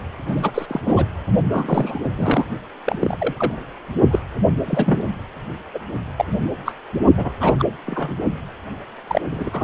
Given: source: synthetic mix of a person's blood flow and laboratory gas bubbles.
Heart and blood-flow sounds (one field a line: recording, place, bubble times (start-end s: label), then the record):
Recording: Doppler ultrasound of blood flow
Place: precordium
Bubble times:
0.28-0.52 s: bubbles
0.54-0.80 s: bubbles
0.84-1.05 s: bubbles
1.51-2.00 s: bubbles
2.17-2.44 s: bubbles
2.86-3.17 s: bubbles
3.19-3.61 s: bubbles
4.11-4.19 s: bubbles
4.66-5.03 s: bubbles
5.74-5.79 s: bubbles
6.18-6.25 s: bubbles
6.44-6.50 s: bubbles
6.65-6.73 s: bubbles
7.17-7.29 s: bubbles
7.40-7.56 s: bubbles
7.59-7.65 s: bubbles
7.87-8.14 s: bubbles
9.07-9.21 s: bubbles
9.31-9.50 s: bubbles
9.53-9.64 s: bubbles
From the record:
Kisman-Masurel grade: 242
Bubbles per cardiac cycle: several, 3 to 8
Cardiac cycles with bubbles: 100%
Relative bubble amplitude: moderate (0.250 to 0.450)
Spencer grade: 3 (all of the cardiac periods contain showers or single bubble signals, but not dominating or overriding the cardiac motion signals)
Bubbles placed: only in the low amplitude regions of the cardiac cycle